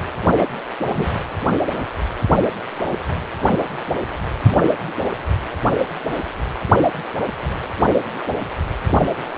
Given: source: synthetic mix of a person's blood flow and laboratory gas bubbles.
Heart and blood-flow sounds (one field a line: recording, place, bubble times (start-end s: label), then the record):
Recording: Doppler ultrasound of blood flow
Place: precordium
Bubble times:
0.36-0.47 s: bubbles
0.89-1.11 s: bubbles
From the record:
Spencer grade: 2 (many but less than half of the cardiac periods contain bubble signals, singularly or in groups)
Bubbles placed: anywhere in the cardiac cycle